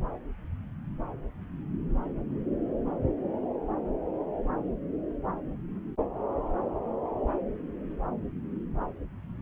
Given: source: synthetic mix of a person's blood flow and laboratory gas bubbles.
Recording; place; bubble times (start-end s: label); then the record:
Doppler ultrasound of blood flow; subclavian vein
no bubbles
From the record:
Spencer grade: 0 (complete lack of bubble signals)